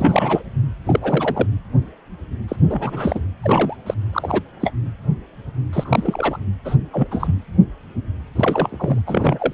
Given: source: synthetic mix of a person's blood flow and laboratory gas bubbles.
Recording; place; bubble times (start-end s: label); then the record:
Doppler ultrasound of blood flow; precordium
0.00-0.43 s: bubbles
0.85-1.47 s: bubbles
2.48-2.56 s: bubbles
2.69-3.20 s: bubbles
3.42-3.76 s: bubbles
3.86-3.94 s: bubbles
4.12-4.41 s: bubbles
4.60-4.72 s: bubbles
5.72-6.39 s: bubbles
6.64-6.75 s: bubbles
6.93-7.08 s: bubbles
7.10-7.35 s: bubbles
8.36-9.02 s: bubbles
9.06-9.54 s: bubbles
From the record:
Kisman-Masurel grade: 232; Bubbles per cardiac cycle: several, 3 to 8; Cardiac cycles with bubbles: 50 to 99%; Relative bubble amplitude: moderate (0.250 to 0.450); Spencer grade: 3 (all of the cardiac periods contain showers or single bubble signals, but not dominating or overriding the cardiac motion signals); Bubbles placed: anywhere in the cardiac cycle